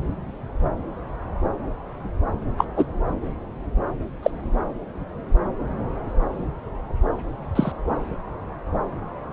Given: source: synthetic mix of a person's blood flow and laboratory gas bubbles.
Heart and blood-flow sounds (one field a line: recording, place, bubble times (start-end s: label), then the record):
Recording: Doppler ultrasound of blood flow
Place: subclavian vein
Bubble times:
2.57-2.65 s: bubbles
2.76-2.85 s: bubbles
4.22-4.30 s: bubbles
7.55-7.72 s: bubbles
From the record:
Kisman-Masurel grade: 123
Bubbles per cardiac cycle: 1 to 2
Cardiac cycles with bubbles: 10 to 50%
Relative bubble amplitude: loud (0.450 to 0.775)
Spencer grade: 2 (many but less than half of the cardiac periods contain bubble signals, singularly or in groups)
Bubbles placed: anywhere in the cardiac cycle